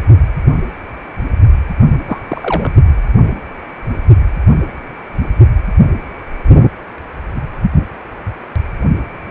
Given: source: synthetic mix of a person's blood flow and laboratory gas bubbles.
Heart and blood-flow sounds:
Doppler ultrasound of blood flow; precordium
2.07-2.20 s: bubbles
2.28-2.74 s: bubbles
From the record:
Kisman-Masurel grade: 212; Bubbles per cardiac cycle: several, 3 to 8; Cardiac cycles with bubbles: 1 to 10%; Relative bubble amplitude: moderate (0.250 to 0.450); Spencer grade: 1 (occasional bubble signal discernible with the cardiac motion signal, with majority of cardiac periods free of bubbles); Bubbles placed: only in the low amplitude regions of the cardiac cycle

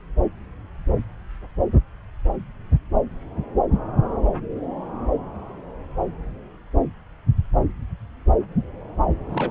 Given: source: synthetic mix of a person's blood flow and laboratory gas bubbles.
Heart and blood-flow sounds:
Doppler ultrasound of blood flow; subclavian vein
9.31-9.51 s: bubbles
From the record:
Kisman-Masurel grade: 112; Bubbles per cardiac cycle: 1 to 2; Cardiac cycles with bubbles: 1 to 10%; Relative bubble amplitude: moderate (0.250 to 0.450); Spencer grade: 1 (occasional bubble signal discernible with the cardiac motion signal, with majority of cardiac periods free of bubbles); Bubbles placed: anywhere in the cardiac cycle

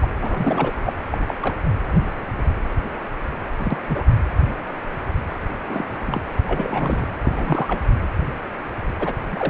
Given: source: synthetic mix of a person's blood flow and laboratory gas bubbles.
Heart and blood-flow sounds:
Doppler ultrasound of blood flow; precordium
0.00-0.09 s: bubbles
0.20-0.72 s: bubbles
0.84-0.92 s: bubbles
1.11-1.18 s: bubbles
1.28-1.34 s: bubbles
1.42-1.56 s: bubbles
3.59-3.77 s: bubbles
3.90-4.04 s: bubbles
5.68-6.29 s: bubbles
6.47-7.06 s: bubbles
7.23-7.80 s: bubbles
8.99-9.15 s: bubbles
9.30-9.50 s: bubbles
From the record:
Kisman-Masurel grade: 232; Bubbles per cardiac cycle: several, 3 to 8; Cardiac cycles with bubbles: 50 to 99%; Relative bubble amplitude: moderate (0.250 to 0.450); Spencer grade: 3 (all of the cardiac periods contain showers or single bubble signals, but not dominating or overriding the cardiac motion signals); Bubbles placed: anywhere in the cardiac cycle

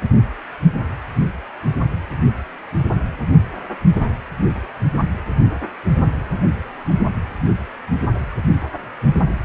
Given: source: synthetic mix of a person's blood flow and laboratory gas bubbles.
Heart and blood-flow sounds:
Doppler ultrasound of blood flow; precordium
no bubbles
From the record:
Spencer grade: 0 (complete lack of bubble signals)

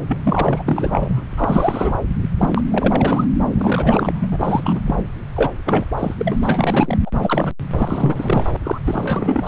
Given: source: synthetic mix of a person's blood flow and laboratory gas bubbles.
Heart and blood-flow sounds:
Doppler ultrasound of blood flow; subclavian vein
0.07-0.17 s: bubbles
0.23-0.64 s: bubbles
0.66-1.22 s: bubbles
1.36-1.95 s: bubbles
2.38-2.62 s: bubbles
2.71-3.28 s: bubbles
3.56-4.29 s: bubbles
4.32-4.80 s: bubbles
4.86-4.95 s: bubbles
5.34-5.50 s: bubbles
5.66-5.84 s: bubbles
5.97-6.14 s: bubbles
6.18-6.37 s: bubbles
6.42-6.98 s: bubbles
7.05-7.11 s: bubbles
7.21-7.54 s: bubbles
7.78-8.45 s: bubbles
8.63-8.78 s: bubbles
8.86-9.47 s: bubbles
From the record:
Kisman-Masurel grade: 342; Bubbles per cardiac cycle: rolling drumbeat, 9 or more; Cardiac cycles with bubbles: 100%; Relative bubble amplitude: moderate (0.250 to 0.450); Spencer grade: 3 (all of the cardiac periods contain showers or single bubble signals, but not dominating or overriding the cardiac motion signals); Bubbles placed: anywhere in the cardiac cycle

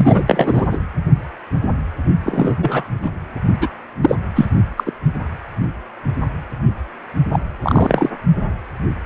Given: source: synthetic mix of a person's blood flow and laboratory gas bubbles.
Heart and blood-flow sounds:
Doppler ultrasound of blood flow; precordium
0.00-0.67 s: bubbles
0.71-0.78 s: bubbles
2.25-2.56 s: bubbles
2.60-2.83 s: bubbles
3.02-3.10 s: bubbles
3.61-3.68 s: bubbles
4.02-4.15 s: bubbles
4.35-4.46 s: bubbles
4.77-4.93 s: bubbles
7.32-7.39 s: bubbles
7.62-8.09 s: bubbles
From the record:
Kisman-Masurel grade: 223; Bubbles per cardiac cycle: several, 3 to 8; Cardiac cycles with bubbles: 10 to 50%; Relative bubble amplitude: loud (0.450 to 0.775); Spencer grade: 2 (many but less than half of the cardiac periods contain bubble signals, singularly or in groups); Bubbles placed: only in the low amplitude regions of the cardiac cycle

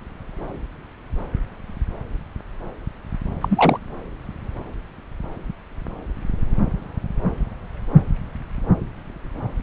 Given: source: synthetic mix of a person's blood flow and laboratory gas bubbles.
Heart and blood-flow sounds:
Doppler ultrasound of blood flow; subclavian vein
3.41-3.80 s: bubbles
From the record:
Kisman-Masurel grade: 212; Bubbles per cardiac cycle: several, 3 to 8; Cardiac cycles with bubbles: 1 to 10%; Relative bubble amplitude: moderate (0.250 to 0.450); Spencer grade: 1 (occasional bubble signal discernible with the cardiac motion signal, with majority of cardiac periods free of bubbles); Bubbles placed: anywhere in the cardiac cycle

